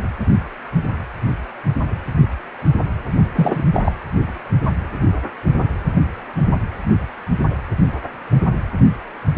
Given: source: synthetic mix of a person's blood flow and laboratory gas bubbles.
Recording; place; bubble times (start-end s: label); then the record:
Doppler ultrasound of blood flow; precordium
3.35-3.65 s: bubbles
3.74-3.92 s: bubbles
From the record:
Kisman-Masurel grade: 223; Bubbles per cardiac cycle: several, 3 to 8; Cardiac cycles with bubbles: 10 to 50%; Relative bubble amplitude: loud (0.450 to 0.775); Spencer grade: 2 (many but less than half of the cardiac periods contain bubble signals, singularly or in groups); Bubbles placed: only in the low amplitude regions of the cardiac cycle